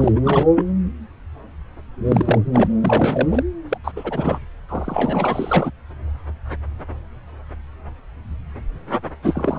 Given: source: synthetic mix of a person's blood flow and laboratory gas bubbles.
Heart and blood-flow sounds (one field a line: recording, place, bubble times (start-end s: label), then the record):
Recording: Doppler ultrasound of blood flow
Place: subclavian vein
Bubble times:
0.00-0.12 s: bubbles
0.15-0.20 s: bubbles
0.23-0.47 s: bubbles
0.55-0.66 s: bubbles
2.05-2.39 s: bubbles
2.53-2.69 s: bubbles
2.81-3.43 s: bubbles
3.69-3.78 s: bubbles
3.84-3.92 s: bubbles
3.96-4.38 s: bubbles
4.69-5.71 s: bubbles
9.22-9.59 s: bubbles
From the record:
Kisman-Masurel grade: 332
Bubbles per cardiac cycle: rolling drumbeat, 9 or more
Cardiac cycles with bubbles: 50 to 99%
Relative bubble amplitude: moderate (0.250 to 0.450)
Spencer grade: 3 (all of the cardiac periods contain showers or single bubble signals, but not dominating or overriding the cardiac motion signals)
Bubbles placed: anywhere in the cardiac cycle